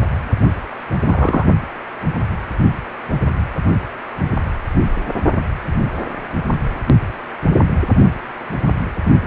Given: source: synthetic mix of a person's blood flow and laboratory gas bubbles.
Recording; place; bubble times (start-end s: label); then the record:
Doppler ultrasound of blood flow; precordium
1.04-1.45 s: bubbles
From the record:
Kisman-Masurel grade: 113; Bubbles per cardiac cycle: 1 to 2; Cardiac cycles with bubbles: 1 to 10%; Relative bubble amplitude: loud (0.450 to 0.775); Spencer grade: 1 (occasional bubble signal discernible with the cardiac motion signal, with majority of cardiac periods free of bubbles); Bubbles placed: only in the low amplitude regions of the cardiac cycle